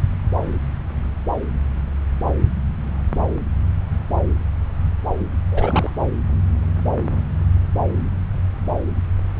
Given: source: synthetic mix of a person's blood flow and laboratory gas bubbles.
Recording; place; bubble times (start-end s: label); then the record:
Doppler ultrasound of blood flow; subclavian vein
5.51-5.90 s: bubbles
From the record:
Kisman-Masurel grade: 212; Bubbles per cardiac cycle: several, 3 to 8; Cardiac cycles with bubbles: 1 to 10%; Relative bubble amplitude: moderate (0.250 to 0.450); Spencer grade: 1 (occasional bubble signal discernible with the cardiac motion signal, with majority of cardiac periods free of bubbles); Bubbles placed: anywhere in the cardiac cycle